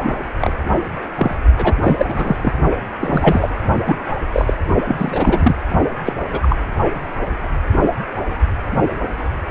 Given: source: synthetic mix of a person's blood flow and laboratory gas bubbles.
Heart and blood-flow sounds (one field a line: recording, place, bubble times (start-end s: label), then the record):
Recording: Doppler ultrasound of blood flow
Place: precordium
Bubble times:
0.00-0.14 s: bubbles
0.39-0.52 s: bubbles
1.16-1.35 s: bubbles
1.57-1.74 s: bubbles
1.83-2.36 s: bubbles
2.42-2.53 s: bubbles
3.00-3.50 s: bubbles
3.86-3.96 s: bubbles
4.32-4.54 s: bubbles
4.87-5.54 s: bubbles
6.06-6.13 s: bubbles
6.32-6.57 s: bubbles
From the record:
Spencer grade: 3 (all of the cardiac periods contain showers or single bubble signals, but not dominating or overriding the cardiac motion signals)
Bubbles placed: only in the low amplitude regions of the cardiac cycle